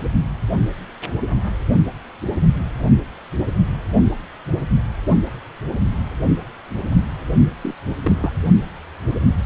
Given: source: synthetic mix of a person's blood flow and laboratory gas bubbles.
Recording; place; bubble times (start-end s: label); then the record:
Doppler ultrasound of blood flow; precordium
7.61-7.75 s: bubbles
8.05-8.32 s: bubbles
From the record:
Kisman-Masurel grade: 221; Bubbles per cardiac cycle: several, 3 to 8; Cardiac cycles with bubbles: 10 to 50%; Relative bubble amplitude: barely perceptible (0.100 to 0.250); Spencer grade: 2 (many but less than half of the cardiac periods contain bubble signals, singularly or in groups); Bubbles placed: only in the low amplitude regions of the cardiac cycle